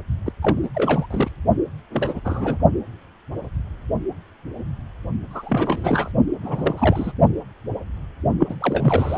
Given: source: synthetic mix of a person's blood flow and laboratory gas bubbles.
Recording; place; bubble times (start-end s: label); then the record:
Doppler ultrasound of blood flow; precordium
0.26-0.33 s: bubbles
0.42-0.59 s: bubbles
0.62-0.69 s: bubbles
0.75-1.06 s: bubbles
1.10-1.30 s: bubbles
1.92-2.21 s: bubbles
2.25-2.58 s: bubbles
5.30-6.12 s: bubbles
6.42-7.12 s: bubbles
8.39-8.56 s: bubbles
8.60-9.18 s: bubbles
From the record:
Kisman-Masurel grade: 332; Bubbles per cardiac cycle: rolling drumbeat, 9 or more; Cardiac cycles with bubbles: 50 to 99%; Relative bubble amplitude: moderate (0.250 to 0.450); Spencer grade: 3 (all of the cardiac periods contain showers or single bubble signals, but not dominating or overriding the cardiac motion signals); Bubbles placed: only in the low amplitude regions of the cardiac cycle